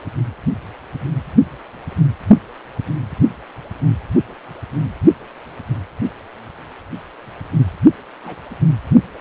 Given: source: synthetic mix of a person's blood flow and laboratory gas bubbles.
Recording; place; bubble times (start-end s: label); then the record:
Doppler ultrasound of blood flow; precordium
8.24-8.35 s: bubbles
From the record:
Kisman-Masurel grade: 111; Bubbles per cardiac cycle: 1 to 2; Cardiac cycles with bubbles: 1 to 10%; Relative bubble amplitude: barely perceptible (0.100 to 0.250); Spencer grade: 1 (occasional bubble signal discernible with the cardiac motion signal, with majority of cardiac periods free of bubbles); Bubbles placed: anywhere in the cardiac cycle